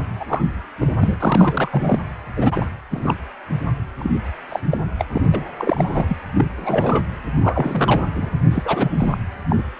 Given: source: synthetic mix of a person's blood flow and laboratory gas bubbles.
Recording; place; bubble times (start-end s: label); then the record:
Doppler ultrasound of blood flow; precordium
0.20-0.43 s: bubbles
0.80-0.95 s: bubbles
1.00-1.16 s: bubbles
1.20-1.99 s: bubbles
2.37-2.66 s: bubbles
2.91-3.15 s: bubbles
3.98-4.10 s: bubbles
4.49-4.59 s: bubbles
4.69-4.77 s: bubbles
4.98-5.05 s: bubbles
5.13-5.25 s: bubbles
5.33-5.48 s: bubbles
5.57-6.17 s: bubbles
6.34-6.44 s: bubbles
6.56-7.04 s: bubbles
7.41-8.03 s: bubbles
8.16-8.29 s: bubbles
8.51-8.92 s: bubbles
8.98-9.18 s: bubbles
9.49-9.63 s: bubbles
From the record:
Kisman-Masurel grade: 243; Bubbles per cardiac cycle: several, 3 to 8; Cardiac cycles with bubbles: 100%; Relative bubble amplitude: loud (0.450 to 0.775); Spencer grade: 3 (all of the cardiac periods contain showers or single bubble signals, but not dominating or overriding the cardiac motion signals); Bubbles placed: anywhere in the cardiac cycle